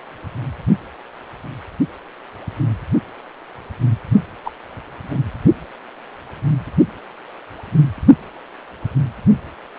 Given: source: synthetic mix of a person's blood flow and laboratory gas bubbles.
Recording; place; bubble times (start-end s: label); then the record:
Doppler ultrasound of blood flow; precordium
4.45-4.51 s: bubbles
5.11-5.18 s: bubbles
From the record:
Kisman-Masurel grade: 112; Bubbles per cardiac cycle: 1 to 2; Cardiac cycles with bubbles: 1 to 10%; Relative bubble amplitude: moderate (0.250 to 0.450); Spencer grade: 1 (occasional bubble signal discernible with the cardiac motion signal, with majority of cardiac periods free of bubbles); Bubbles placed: only in the low amplitude regions of the cardiac cycle